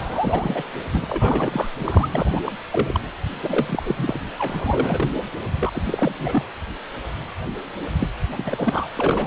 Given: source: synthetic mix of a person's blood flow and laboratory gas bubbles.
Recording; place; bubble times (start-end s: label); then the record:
Doppler ultrasound of blood flow; precordium
0.00-0.62 s: bubbles
0.91-1.68 s: bubbles
1.85-2.09 s: bubbles
2.12-2.40 s: bubbles
2.46-2.52 s: bubbles
2.71-3.00 s: bubbles
3.43-4.21 s: bubbles
4.38-5.10 s: bubbles
5.61-5.71 s: bubbles
5.73-6.45 s: bubbles
7.99-8.08 s: bubbles
8.29-8.88 s: bubbles
8.96-9.27 s: bubbles
From the record:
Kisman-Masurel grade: 332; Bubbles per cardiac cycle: rolling drumbeat, 9 or more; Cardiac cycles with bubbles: 50 to 99%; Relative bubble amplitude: moderate (0.250 to 0.450); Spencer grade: 3 (all of the cardiac periods contain showers or single bubble signals, but not dominating or overriding the cardiac motion signals); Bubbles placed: anywhere in the cardiac cycle